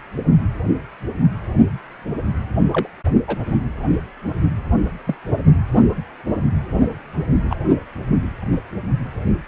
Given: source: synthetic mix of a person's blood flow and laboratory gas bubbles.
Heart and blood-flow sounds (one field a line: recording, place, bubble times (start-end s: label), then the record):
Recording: Doppler ultrasound of blood flow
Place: precordium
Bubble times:
2.73-2.88 s: bubbles
3.28-3.37 s: bubbles
5.06-5.15 s: bubbles
7.50-7.56 s: bubbles
From the record:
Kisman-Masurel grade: 122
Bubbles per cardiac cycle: 1 to 2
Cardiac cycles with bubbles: 10 to 50%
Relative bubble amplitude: moderate (0.250 to 0.450)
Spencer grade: 2 (many but less than half of the cardiac periods contain bubble signals, singularly or in groups)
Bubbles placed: only in the low amplitude regions of the cardiac cycle